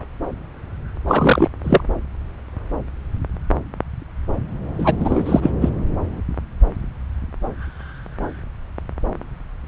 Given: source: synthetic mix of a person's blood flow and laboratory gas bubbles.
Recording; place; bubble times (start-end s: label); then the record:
Doppler ultrasound of blood flow; subclavian vein
1.08-1.50 s: bubbles
1.64-1.81 s: bubbles
4.79-4.96 s: bubbles
5.00-5.51 s: bubbles
5.61-5.70 s: bubbles
From the record:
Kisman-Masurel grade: 223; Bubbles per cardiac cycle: several, 3 to 8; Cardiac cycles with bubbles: 10 to 50%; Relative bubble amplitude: loud (0.450 to 0.775); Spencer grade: 2 (many but less than half of the cardiac periods contain bubble signals, singularly or in groups); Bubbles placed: anywhere in the cardiac cycle